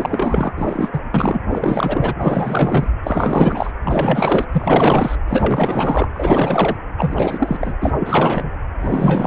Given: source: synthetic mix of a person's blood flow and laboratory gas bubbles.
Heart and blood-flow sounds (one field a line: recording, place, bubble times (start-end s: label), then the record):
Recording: Doppler ultrasound of blood flow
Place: precordium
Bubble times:
0.00-0.53 s: bubbles
0.56-1.00 s: bubbles
1.14-1.40 s: bubbles
1.51-2.15 s: bubbles
2.21-2.88 s: bubbles
3.03-3.72 s: bubbles
3.84-4.45 s: bubbles
4.52-5.15 s: bubbles
5.27-6.07 s: bubbles
6.13-6.76 s: bubbles
6.97-7.74 s: bubbles
7.82-7.91 s: bubbles
7.99-8.50 s: bubbles
8.79-9.27 s: bubbles
From the record:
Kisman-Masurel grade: 444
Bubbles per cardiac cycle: continuous sound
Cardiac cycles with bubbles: 100%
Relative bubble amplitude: maximal (0.775 to 0.999)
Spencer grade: 4 (maximum detectable bubble signal sounding continuously throughout systole and diastole of every cardiac period, and overriding the amplitude of the normal cardiac signals)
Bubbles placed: anywhere in the cardiac cycle